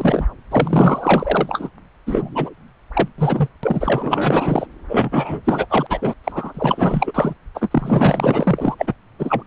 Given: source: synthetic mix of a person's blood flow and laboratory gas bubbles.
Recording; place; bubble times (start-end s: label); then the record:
Doppler ultrasound of blood flow; subclavian vein
0.00-0.27 s: bubbles
0.51-1.69 s: bubbles
2.06-2.50 s: bubbles
2.93-3.08 s: bubbles
3.18-3.48 s: bubbles
3.63-4.67 s: bubbles
4.89-5.41 s: bubbles
5.45-5.67 s: bubbles
5.70-5.87 s: bubbles
5.89-6.14 s: bubbles
6.24-7.35 s: bubbles
7.54-8.75 s: bubbles
8.78-8.94 s: bubbles
9.18-9.43 s: bubbles
From the record:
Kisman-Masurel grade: 444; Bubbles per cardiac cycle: continuous sound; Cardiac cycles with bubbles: 100%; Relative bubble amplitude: maximal (0.775 to 0.999); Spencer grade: 4 (maximum detectable bubble signal sounding continuously throughout systole and diastole of every cardiac period, and overriding the amplitude of the normal cardiac signals); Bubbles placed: anywhere in the cardiac cycle